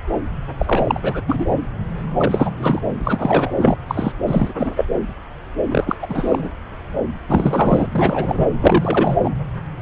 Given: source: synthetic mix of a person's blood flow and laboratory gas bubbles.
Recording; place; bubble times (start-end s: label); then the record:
Doppler ultrasound of blood flow; subclavian vein
0.58-1.22 s: bubbles
1.27-1.46 s: bubbles
2.17-2.51 s: bubbles
2.57-2.81 s: bubbles
2.98-3.52 s: bubbles
3.58-3.77 s: bubbles
3.88-4.12 s: bubbles
4.27-4.86 s: bubbles
5.71-5.96 s: bubbles
6.02-6.51 s: bubbles
7.29-7.88 s: bubbles
7.92-8.48 s: bubbles
8.61-9.21 s: bubbles
9.23-9.31 s: bubbles
From the record:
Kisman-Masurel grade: 333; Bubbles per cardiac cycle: rolling drumbeat, 9 or more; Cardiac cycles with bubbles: 50 to 99%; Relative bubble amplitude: loud (0.450 to 0.775); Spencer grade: 3 (all of the cardiac periods contain showers or single bubble signals, but not dominating or overriding the cardiac motion signals); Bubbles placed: anywhere in the cardiac cycle